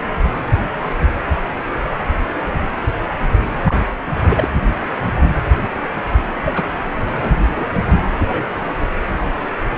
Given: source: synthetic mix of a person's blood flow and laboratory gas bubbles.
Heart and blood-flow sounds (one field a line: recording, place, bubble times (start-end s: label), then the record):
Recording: Doppler ultrasound of blood flow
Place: precordium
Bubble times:
3.64-3.75 s: bubbles
4.29-4.49 s: bubbles
6.45-6.64 s: bubbles
7.20-7.66 s: bubbles
8.20-8.51 s: bubbles
From the record:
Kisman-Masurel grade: 122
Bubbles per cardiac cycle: 1 to 2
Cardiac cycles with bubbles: 10 to 50%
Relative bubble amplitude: moderate (0.250 to 0.450)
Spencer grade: 2 (many but less than half of the cardiac periods contain bubble signals, singularly or in groups)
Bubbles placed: anywhere in the cardiac cycle